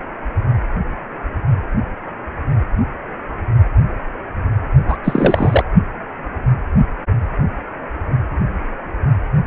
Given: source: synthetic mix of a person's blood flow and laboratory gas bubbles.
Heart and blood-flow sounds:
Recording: Doppler ultrasound of blood flow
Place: precordium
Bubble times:
4.87-4.97 s: bubbles
5.04-5.64 s: bubbles
From the record:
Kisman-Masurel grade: 213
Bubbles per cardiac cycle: several, 3 to 8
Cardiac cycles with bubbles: 1 to 10%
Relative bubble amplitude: loud (0.450 to 0.775)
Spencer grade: 1 (occasional bubble signal discernible with the cardiac motion signal, with majority of cardiac periods free of bubbles)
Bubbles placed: only in the low amplitude regions of the cardiac cycle

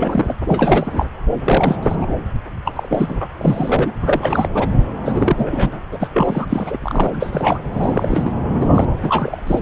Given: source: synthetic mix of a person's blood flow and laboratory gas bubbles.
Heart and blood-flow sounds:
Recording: Doppler ultrasound of blood flow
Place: subclavian vein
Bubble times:
0.00-0.36 s: bubbles
0.48-1.10 s: bubbles
1.44-2.08 s: bubbles
2.65-2.73 s: bubbles
2.75-3.27 s: bubbles
3.38-3.92 s: bubbles
4.02-4.49 s: bubbles
4.54-4.68 s: bubbles
5.03-5.87 s: bubbles
5.92-5.97 s: bubbles
6.00-6.08 s: bubbles
6.14-6.77 s: bubbles
6.82-7.60 s: bubbles
7.72-8.32 s: bubbles
8.60-8.87 s: bubbles
9.03-9.40 s: bubbles
9.46-9.59 s: bubbles
From the record:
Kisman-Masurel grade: 342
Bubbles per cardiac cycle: rolling drumbeat, 9 or more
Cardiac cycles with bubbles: 100%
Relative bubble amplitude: moderate (0.250 to 0.450)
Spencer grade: 3 (all of the cardiac periods contain showers or single bubble signals, but not dominating or overriding the cardiac motion signals)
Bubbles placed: anywhere in the cardiac cycle

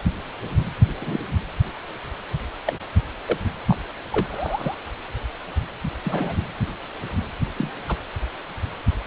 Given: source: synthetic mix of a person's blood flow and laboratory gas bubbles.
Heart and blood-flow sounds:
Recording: Doppler ultrasound of blood flow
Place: precordium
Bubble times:
1.02-1.20 s: bubbles
2.65-2.73 s: bubbles
3.28-3.37 s: bubbles
3.67-3.77 s: bubbles
4.12-4.26 s: bubbles
4.29-4.75 s: bubbles
6.04-6.36 s: bubbles
7.58-7.71 s: bubbles
7.89-7.95 s: bubbles
From the record:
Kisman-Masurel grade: 122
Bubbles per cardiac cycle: 1 to 2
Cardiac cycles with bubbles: 10 to 50%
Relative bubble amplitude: moderate (0.250 to 0.450)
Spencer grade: 2 (many but less than half of the cardiac periods contain bubble signals, singularly or in groups)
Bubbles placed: anywhere in the cardiac cycle

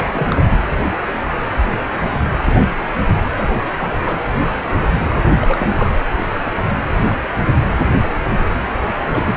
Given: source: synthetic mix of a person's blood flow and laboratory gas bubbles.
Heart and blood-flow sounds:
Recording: Doppler ultrasound of blood flow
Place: precordium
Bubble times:
0.00-0.44 s: bubbles
3.36-3.58 s: bubbles
3.77-3.92 s: bubbles
4.03-4.17 s: bubbles
5.12-5.90 s: bubbles
9.13-9.36 s: bubbles
From the record:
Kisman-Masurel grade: 222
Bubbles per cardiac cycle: several, 3 to 8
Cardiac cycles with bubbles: 10 to 50%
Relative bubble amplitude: moderate (0.250 to 0.450)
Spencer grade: 2 (many but less than half of the cardiac periods contain bubble signals, singularly or in groups)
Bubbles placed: anywhere in the cardiac cycle

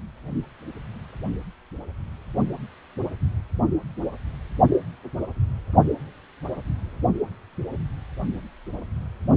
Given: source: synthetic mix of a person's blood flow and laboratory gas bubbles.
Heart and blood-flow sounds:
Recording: Doppler ultrasound of blood flow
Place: precordium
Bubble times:
no bubbles
From the record:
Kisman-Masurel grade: 000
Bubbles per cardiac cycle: 0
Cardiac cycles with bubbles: 0%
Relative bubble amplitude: no bubbles discernible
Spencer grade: 0 (complete lack of bubble signals)

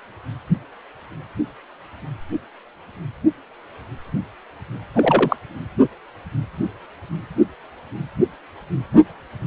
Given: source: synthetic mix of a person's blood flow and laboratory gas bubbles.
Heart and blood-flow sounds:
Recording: Doppler ultrasound of blood flow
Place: precordium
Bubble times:
4.94-5.36 s: bubbles
From the record:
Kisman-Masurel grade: 223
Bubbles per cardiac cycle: several, 3 to 8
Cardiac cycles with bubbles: 10 to 50%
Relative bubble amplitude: loud (0.450 to 0.775)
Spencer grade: 2 (many but less than half of the cardiac periods contain bubble signals, singularly or in groups)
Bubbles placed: anywhere in the cardiac cycle

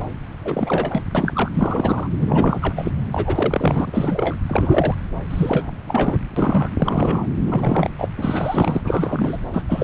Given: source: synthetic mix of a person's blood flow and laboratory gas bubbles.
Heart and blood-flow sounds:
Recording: Doppler ultrasound of blood flow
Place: subclavian vein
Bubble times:
0.44-1.02 s: bubbles
1.15-2.08 s: bubbles
2.19-2.59 s: bubbles
2.61-2.91 s: bubbles
3.12-4.36 s: bubbles
4.46-4.95 s: bubbles
5.30-5.71 s: bubbles
5.87-6.17 s: bubbles
6.36-6.68 s: bubbles
6.78-7.26 s: bubbles
7.47-7.93 s: bubbles
7.98-8.09 s: bubbles
8.18-8.82 s: bubbles
8.85-9.38 s: bubbles
9.52-9.64 s: bubbles
9.67-9.84 s: bubbles
From the record:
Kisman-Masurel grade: 343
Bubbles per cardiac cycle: rolling drumbeat, 9 or more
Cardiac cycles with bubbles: 100%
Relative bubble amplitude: loud (0.450 to 0.775)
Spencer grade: 3 (all of the cardiac periods contain showers or single bubble signals, but not dominating or overriding the cardiac motion signals)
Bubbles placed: anywhere in the cardiac cycle

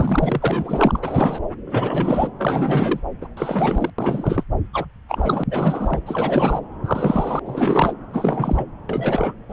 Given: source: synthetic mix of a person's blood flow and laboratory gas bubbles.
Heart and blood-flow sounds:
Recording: Doppler ultrasound of blood flow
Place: subclavian vein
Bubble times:
0.00-0.99 s: bubbles
1.02-1.38 s: bubbles
1.66-2.30 s: bubbles
2.38-3.00 s: bubbles
3.21-3.27 s: bubbles
3.36-3.90 s: bubbles
3.98-4.43 s: bubbles
4.73-4.85 s: bubbles
5.08-5.44 s: bubbles
5.50-6.00 s: bubbles
6.06-6.60 s: bubbles
6.84-7.39 s: bubbles
7.45-7.93 s: bubbles
8.13-8.66 s: bubbles
8.89-9.34 s: bubbles
9.48-9.53 s: bubbles
From the record:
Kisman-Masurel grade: 342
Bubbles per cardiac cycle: rolling drumbeat, 9 or more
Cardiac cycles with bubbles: 100%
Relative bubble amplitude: moderate (0.250 to 0.450)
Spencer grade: 3 (all of the cardiac periods contain showers or single bubble signals, but not dominating or overriding the cardiac motion signals)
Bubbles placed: anywhere in the cardiac cycle

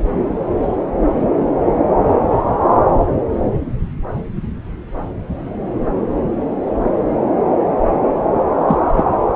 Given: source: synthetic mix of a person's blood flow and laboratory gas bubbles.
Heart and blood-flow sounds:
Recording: Doppler ultrasound of blood flow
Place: subclavian vein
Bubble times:
8.68-8.78 s: bubbles
8.97-9.04 s: bubbles
From the record:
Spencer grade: 1 (occasional bubble signal discernible with the cardiac motion signal, with majority of cardiac periods free of bubbles)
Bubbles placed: anywhere in the cardiac cycle

